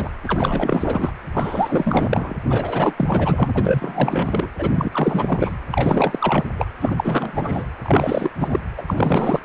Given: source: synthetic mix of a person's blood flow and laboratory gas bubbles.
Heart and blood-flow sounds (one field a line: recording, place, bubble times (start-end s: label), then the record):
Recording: Doppler ultrasound of blood flow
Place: precordium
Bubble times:
0.00-0.10 s: bubbles
0.23-1.12 s: bubbles
1.33-2.35 s: bubbles
2.49-3.51 s: bubbles
3.54-4.50 s: bubbles
4.58-5.53 s: bubbles
5.71-6.46 s: bubbles
6.58-6.67 s: bubbles
6.81-7.32 s: bubbles
7.36-7.66 s: bubbles
7.82-8.30 s: bubbles
8.39-8.59 s: bubbles
8.77-8.83 s: bubbles
8.87-9.39 s: bubbles
From the record:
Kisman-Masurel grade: 444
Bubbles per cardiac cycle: continuous sound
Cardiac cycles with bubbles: 100%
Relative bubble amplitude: maximal (0.775 to 0.999)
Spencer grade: 4 (maximum detectable bubble signal sounding continuously throughout systole and diastole of every cardiac period, and overriding the amplitude of the normal cardiac signals)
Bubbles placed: anywhere in the cardiac cycle